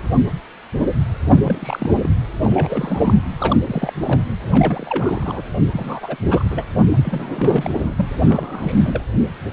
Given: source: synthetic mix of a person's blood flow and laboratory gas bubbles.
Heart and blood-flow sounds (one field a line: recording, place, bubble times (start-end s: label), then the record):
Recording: Doppler ultrasound of blood flow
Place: precordium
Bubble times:
1.29-2.10 s: bubbles
2.42-3.21 s: bubbles
3.38-3.58 s: bubbles
3.66-4.24 s: bubbles
4.51-5.42 s: bubbles
5.72-6.16 s: bubbles
6.26-6.71 s: bubbles
6.93-7.75 s: bubbles
7.79-8.05 s: bubbles
8.25-9.04 s: bubbles
From the record:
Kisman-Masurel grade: 332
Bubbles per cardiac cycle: rolling drumbeat, 9 or more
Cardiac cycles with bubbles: 50 to 99%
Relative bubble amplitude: moderate (0.250 to 0.450)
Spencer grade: 3 (all of the cardiac periods contain showers or single bubble signals, but not dominating or overriding the cardiac motion signals)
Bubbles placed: anywhere in the cardiac cycle